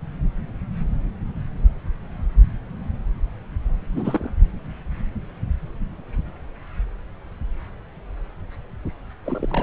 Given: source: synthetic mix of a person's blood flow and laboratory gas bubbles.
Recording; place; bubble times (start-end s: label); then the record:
Doppler ultrasound of blood flow; subclavian vein
3.94-4.31 s: bubbles
9.25-9.63 s: bubbles
From the record:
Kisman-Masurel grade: 221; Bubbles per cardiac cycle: several, 3 to 8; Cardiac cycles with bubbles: 10 to 50%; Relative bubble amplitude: barely perceptible (0.100 to 0.250); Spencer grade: 2 (many but less than half of the cardiac periods contain bubble signals, singularly or in groups); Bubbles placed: anywhere in the cardiac cycle